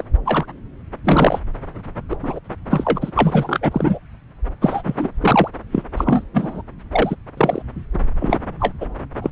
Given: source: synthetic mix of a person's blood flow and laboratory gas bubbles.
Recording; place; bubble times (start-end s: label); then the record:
Doppler ultrasound of blood flow; subclavian vein
0.00-0.04 s: bubbles
0.25-0.46 s: bubbles
1.04-1.40 s: bubbles
2.09-2.17 s: bubbles
2.23-2.40 s: bubbles
2.70-3.11 s: bubbles
3.15-3.99 s: bubbles
4.61-4.95 s: bubbles
4.99-5.09 s: bubbles
5.21-5.48 s: bubbles
5.72-5.83 s: bubbles
5.97-6.24 s: bubbles
6.33-6.62 s: bubbles
6.91-7.16 s: bubbles
7.37-7.62 s: bubbles
7.94-7.96 s: bubbles
8.20-8.38 s: bubbles
8.60-8.74 s: bubbles
8.80-8.87 s: bubbles
9.21-9.30 s: bubbles
From the record:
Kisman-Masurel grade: 233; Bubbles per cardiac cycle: several, 3 to 8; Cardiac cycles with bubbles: 50 to 99%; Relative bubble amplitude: loud (0.450 to 0.775); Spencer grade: 3 (all of the cardiac periods contain showers or single bubble signals, but not dominating or overriding the cardiac motion signals); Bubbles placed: anywhere in the cardiac cycle